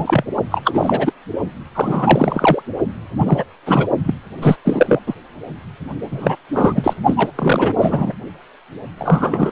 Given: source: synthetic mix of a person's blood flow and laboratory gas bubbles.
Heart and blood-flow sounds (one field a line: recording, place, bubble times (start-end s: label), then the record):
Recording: Doppler ultrasound of blood flow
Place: precordium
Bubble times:
0.00-0.24 s: bubbles
0.51-0.60 s: bubbles
0.64-1.12 s: bubbles
1.75-2.62 s: bubbles
3.17-3.44 s: bubbles
3.66-3.87 s: bubbles
4.04-4.14 s: bubbles
4.42-4.56 s: bubbles
4.64-5.00 s: bubbles
5.06-5.14 s: bubbles
6.11-6.35 s: bubbles
6.54-6.93 s: bubbles
7.05-7.14 s: bubbles
7.17-7.31 s: bubbles
7.35-8.12 s: bubbles
8.97-9.52 s: bubbles
From the record:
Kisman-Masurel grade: 343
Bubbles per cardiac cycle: rolling drumbeat, 9 or more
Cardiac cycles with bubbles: 100%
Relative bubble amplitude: loud (0.450 to 0.775)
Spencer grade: 3 (all of the cardiac periods contain showers or single bubble signals, but not dominating or overriding the cardiac motion signals)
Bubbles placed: only in the low amplitude regions of the cardiac cycle